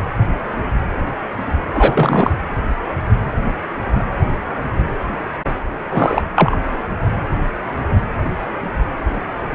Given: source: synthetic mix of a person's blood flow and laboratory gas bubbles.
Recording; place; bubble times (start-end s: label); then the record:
Doppler ultrasound of blood flow; precordium
1.74-2.31 s: bubbles
5.89-6.23 s: bubbles
6.35-6.56 s: bubbles
From the record:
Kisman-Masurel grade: 223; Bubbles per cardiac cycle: several, 3 to 8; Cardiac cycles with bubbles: 10 to 50%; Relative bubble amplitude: loud (0.450 to 0.775); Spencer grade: 2 (many but less than half of the cardiac periods contain bubble signals, singularly or in groups); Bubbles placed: anywhere in the cardiac cycle